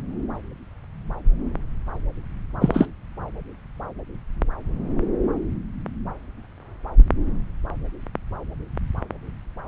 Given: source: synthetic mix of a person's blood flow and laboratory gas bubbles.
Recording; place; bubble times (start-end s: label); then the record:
Doppler ultrasound of blood flow; subclavian vein
2.60-2.86 s: bubbles
From the record:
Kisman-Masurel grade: 113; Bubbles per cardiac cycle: 1 to 2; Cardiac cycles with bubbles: 1 to 10%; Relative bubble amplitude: loud (0.450 to 0.775); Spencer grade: 1 (occasional bubble signal discernible with the cardiac motion signal, with majority of cardiac periods free of bubbles); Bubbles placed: anywhere in the cardiac cycle